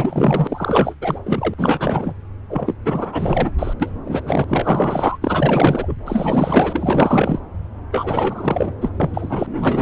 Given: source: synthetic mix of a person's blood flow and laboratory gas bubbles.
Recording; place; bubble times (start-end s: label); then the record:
Doppler ultrasound of blood flow; subclavian vein
0.00-0.94 s: bubbles
1.01-1.21 s: bubbles
1.24-1.54 s: bubbles
1.58-2.15 s: bubbles
2.49-2.75 s: bubbles
2.85-3.52 s: bubbles
3.59-3.74 s: bubbles
3.80-3.91 s: bubbles
4.04-4.45 s: bubbles
4.48-5.17 s: bubbles
5.21-5.94 s: bubbles
6.05-7.40 s: bubbles
7.92-8.75 s: bubbles
8.81-8.90 s: bubbles
9.00-9.82 s: bubbles
From the record:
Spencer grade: 4 (maximum detectable bubble signal sounding continuously throughout systole and diastole of every cardiac period, and overriding the amplitude of the normal cardiac signals); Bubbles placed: anywhere in the cardiac cycle